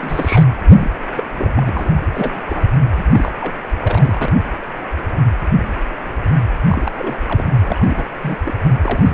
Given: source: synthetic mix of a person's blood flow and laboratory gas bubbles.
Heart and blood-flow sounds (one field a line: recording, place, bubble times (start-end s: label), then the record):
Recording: Doppler ultrasound of blood flow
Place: precordium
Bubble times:
0.00-0.46 s: bubbles
0.78-0.91 s: bubbles
1.17-1.23 s: bubbles
1.36-1.93 s: bubbles
1.96-2.00 s: bubbles
2.06-2.41 s: bubbles
2.44-2.66 s: bubbles
2.97-3.32 s: bubbles
3.41-3.56 s: bubbles
3.79-4.32 s: bubbles
6.69-6.92 s: bubbles
6.98-7.17 s: bubbles
7.28-7.45 s: bubbles
7.61-8.04 s: bubbles
8.22-8.40 s: bubbles
8.44-8.54 s: bubbles
8.81-9.14 s: bubbles
From the record:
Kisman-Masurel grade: 332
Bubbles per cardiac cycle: rolling drumbeat, 9 or more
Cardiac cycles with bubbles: 50 to 99%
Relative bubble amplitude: moderate (0.250 to 0.450)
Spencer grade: 3 (all of the cardiac periods contain showers or single bubble signals, but not dominating or overriding the cardiac motion signals)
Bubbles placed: anywhere in the cardiac cycle